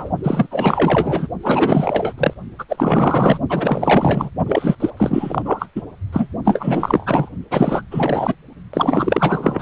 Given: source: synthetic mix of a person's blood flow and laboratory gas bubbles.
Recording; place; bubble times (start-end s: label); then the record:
Doppler ultrasound of blood flow; precordium
0.00-0.10 s: bubbles
0.23-0.47 s: bubbles
0.50-1.28 s: bubbles
1.43-2.14 s: bubbles
2.18-2.33 s: bubbles
2.58-2.65 s: bubbles
2.69-3.39 s: bubbles
3.49-4.30 s: bubbles
4.46-4.75 s: bubbles
4.80-4.90 s: bubbles
4.96-5.68 s: bubbles
5.75-5.82 s: bubbles
6.12-6.27 s: bubbles
6.44-7.30 s: bubbles
7.50-7.82 s: bubbles
7.91-8.34 s: bubbles
8.73-9.62 s: bubbles
From the record:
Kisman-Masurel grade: 444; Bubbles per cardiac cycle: continuous sound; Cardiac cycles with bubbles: 100%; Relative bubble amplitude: maximal (0.775 to 0.999); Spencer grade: 4 (maximum detectable bubble signal sounding continuously throughout systole and diastole of every cardiac period, and overriding the amplitude of the normal cardiac signals); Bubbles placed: only in the low amplitude regions of the cardiac cycle